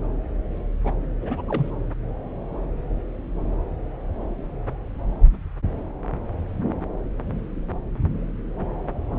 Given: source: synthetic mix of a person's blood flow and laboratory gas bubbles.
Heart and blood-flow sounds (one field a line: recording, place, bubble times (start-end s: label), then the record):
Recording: Doppler ultrasound of blood flow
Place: subclavian vein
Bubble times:
0.84-0.93 s: bubbles
1.21-1.42 s: bubbles
1.47-1.71 s: bubbles
From the record:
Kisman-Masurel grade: 121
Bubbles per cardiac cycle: 1 to 2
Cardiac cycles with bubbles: 10 to 50%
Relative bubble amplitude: barely perceptible (0.100 to 0.250)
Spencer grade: 2 (many but less than half of the cardiac periods contain bubble signals, singularly or in groups)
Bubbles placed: anywhere in the cardiac cycle